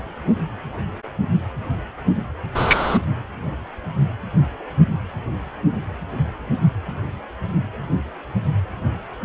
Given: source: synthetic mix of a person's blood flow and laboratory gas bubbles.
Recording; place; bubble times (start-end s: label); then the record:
Doppler ultrasound of blood flow; precordium
2.54-2.99 s: bubbles
From the record:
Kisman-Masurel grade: 113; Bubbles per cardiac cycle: 1 to 2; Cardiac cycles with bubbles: 1 to 10%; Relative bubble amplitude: loud (0.450 to 0.775); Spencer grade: 1 (occasional bubble signal discernible with the cardiac motion signal, with majority of cardiac periods free of bubbles); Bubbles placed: anywhere in the cardiac cycle